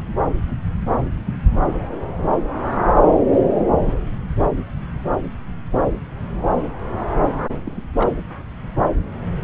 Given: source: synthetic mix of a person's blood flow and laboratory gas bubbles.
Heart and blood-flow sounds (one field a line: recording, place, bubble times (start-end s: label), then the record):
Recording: Doppler ultrasound of blood flow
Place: subclavian vein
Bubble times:
7.65-7.83 s: bubbles
7.97-8.09 s: bubbles
From the record:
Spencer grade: 1 (occasional bubble signal discernible with the cardiac motion signal, with majority of cardiac periods free of bubbles)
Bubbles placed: anywhere in the cardiac cycle